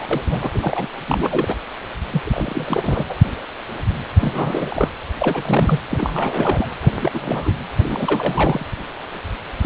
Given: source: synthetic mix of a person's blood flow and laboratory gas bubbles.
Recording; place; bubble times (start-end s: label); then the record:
Doppler ultrasound of blood flow; precordium
0.00-0.06 s: bubbles
0.11-0.21 s: bubbles
0.25-0.51 s: bubbles
0.54-0.87 s: bubbles
1.06-1.54 s: bubbles
2.10-2.21 s: bubbles
2.25-3.05 s: bubbles
3.08-3.15 s: bubbles
4.21-4.89 s: bubbles
5.19-5.80 s: bubbles
5.89-6.68 s: bubbles
6.82-7.12 s: bubbles
7.14-7.54 s: bubbles
7.77-8.66 s: bubbles
9.62-9.66 s: bubbles
From the record:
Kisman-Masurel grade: 332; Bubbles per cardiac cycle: rolling drumbeat, 9 or more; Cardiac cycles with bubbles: 50 to 99%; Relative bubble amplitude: moderate (0.250 to 0.450); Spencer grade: 3 (all of the cardiac periods contain showers or single bubble signals, but not dominating or overriding the cardiac motion signals); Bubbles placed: anywhere in the cardiac cycle